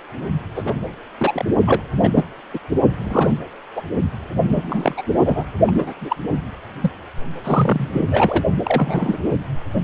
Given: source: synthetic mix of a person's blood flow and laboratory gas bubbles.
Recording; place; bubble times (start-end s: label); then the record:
Doppler ultrasound of blood flow; precordium
0.55-0.73 s: bubbles
1.18-1.45 s: bubbles
1.66-1.83 s: bubbles
2.02-2.25 s: bubbles
2.54-2.59 s: bubbles
2.98-3.35 s: bubbles
3.75-3.81 s: bubbles
4.46-4.95 s: bubbles
4.97-5.03 s: bubbles
5.24-5.45 s: bubbles
5.67-5.92 s: bubbles
6.00-6.16 s: bubbles
6.80-6.91 s: bubbles
7.44-7.89 s: bubbles
7.92-8.06 s: bubbles
8.10-8.43 s: bubbles
8.63-9.18 s: bubbles
From the record:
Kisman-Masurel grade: 243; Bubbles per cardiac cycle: several, 3 to 8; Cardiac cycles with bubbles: 100%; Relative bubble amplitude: loud (0.450 to 0.775); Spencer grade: 3 (all of the cardiac periods contain showers or single bubble signals, but not dominating or overriding the cardiac motion signals); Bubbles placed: only in the low amplitude regions of the cardiac cycle